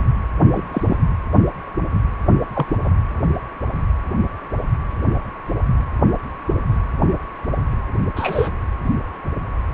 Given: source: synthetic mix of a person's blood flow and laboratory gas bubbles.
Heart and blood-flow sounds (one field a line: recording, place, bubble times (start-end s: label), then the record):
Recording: Doppler ultrasound of blood flow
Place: precordium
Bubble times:
0.53-0.63 s: bubbles
0.71-0.96 s: bubbles
2.52-2.77 s: bubbles
2.84-2.90 s: bubbles
8.15-8.49 s: bubbles
From the record:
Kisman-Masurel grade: 123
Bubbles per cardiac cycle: 1 to 2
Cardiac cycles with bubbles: 10 to 50%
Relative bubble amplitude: loud (0.450 to 0.775)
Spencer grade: 2 (many but less than half of the cardiac periods contain bubble signals, singularly or in groups)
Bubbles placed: anywhere in the cardiac cycle